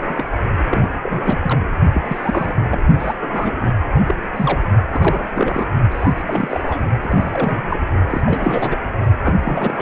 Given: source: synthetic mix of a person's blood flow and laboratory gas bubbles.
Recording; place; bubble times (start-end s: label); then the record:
Doppler ultrasound of blood flow; precordium
0.00-0.03 s: bubbles
0.07-0.27 s: bubbles
0.70-0.90 s: bubbles
1.02-1.40 s: bubbles
1.44-1.62 s: bubbles
1.94-2.02 s: bubbles
2.07-2.81 s: bubbles
2.98-3.13 s: bubbles
3.20-3.81 s: bubbles
3.94-4.15 s: bubbles
4.36-4.60 s: bubbles
4.91-5.26 s: bubbles
5.35-5.69 s: bubbles
5.91-6.84 s: bubbles
7.02-7.80 s: bubbles
8.10-8.21 s: bubbles
8.25-8.80 s: bubbles
9.23-9.82 s: bubbles
From the record:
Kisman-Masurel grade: 342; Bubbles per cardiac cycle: rolling drumbeat, 9 or more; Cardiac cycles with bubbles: 100%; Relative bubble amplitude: moderate (0.250 to 0.450); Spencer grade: 3 (all of the cardiac periods contain showers or single bubble signals, but not dominating or overriding the cardiac motion signals); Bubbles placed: only in the low amplitude regions of the cardiac cycle